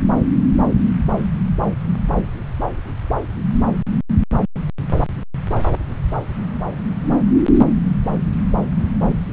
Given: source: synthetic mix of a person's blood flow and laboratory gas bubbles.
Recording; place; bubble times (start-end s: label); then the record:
Doppler ultrasound of blood flow; subclavian vein
no bubbles
From the record:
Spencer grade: 0 (complete lack of bubble signals)